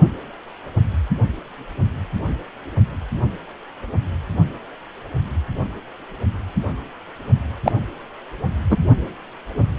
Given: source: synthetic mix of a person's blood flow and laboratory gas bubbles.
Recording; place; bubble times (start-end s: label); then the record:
Doppler ultrasound of blood flow; precordium
7.64-7.72 s: bubbles
8.70-8.77 s: bubbles
From the record:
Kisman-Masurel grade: 123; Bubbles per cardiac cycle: 1 to 2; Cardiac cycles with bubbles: 10 to 50%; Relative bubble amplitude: loud (0.450 to 0.775); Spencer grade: 2 (many but less than half of the cardiac periods contain bubble signals, singularly or in groups); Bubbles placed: only in the low amplitude regions of the cardiac cycle